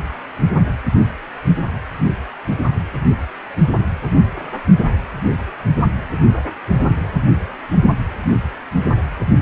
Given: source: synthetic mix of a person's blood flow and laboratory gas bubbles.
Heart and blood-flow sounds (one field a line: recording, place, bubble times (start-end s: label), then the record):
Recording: Doppler ultrasound of blood flow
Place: precordium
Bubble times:
no bubbles
From the record:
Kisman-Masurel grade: 000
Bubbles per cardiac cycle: 0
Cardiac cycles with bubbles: 0%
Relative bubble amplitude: no bubbles discernible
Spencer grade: 0 (complete lack of bubble signals)